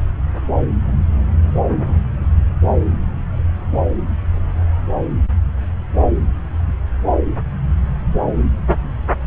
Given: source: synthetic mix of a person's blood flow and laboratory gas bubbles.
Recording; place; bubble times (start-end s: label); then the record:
Doppler ultrasound of blood flow; subclavian vein
no bubbles
From the record:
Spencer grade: 0 (complete lack of bubble signals)